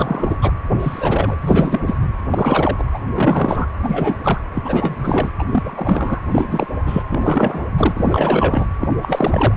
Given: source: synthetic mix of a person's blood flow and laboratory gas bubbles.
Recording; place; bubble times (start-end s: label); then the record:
Doppler ultrasound of blood flow; precordium
0.00-0.37 s: bubbles
0.42-0.52 s: bubbles
0.73-1.38 s: bubbles
1.40-1.96 s: bubbles
2.01-2.11 s: bubbles
2.30-2.83 s: bubbles
2.94-2.98 s: bubbles
3.15-3.66 s: bubbles
3.83-4.17 s: bubbles
4.23-4.41 s: bubbles
4.54-5.31 s: bubbles
5.39-5.44 s: bubbles
5.52-6.20 s: bubbles
6.32-6.67 s: bubbles
6.87-7.03 s: bubbles
7.08-7.66 s: bubbles
7.77-8.66 s: bubbles
8.80-8.89 s: bubbles
9.02-9.54 s: bubbles
From the record:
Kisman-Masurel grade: 342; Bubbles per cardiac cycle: rolling drumbeat, 9 or more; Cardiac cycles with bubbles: 100%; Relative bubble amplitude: moderate (0.250 to 0.450); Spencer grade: 3 (all of the cardiac periods contain showers or single bubble signals, but not dominating or overriding the cardiac motion signals); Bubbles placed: anywhere in the cardiac cycle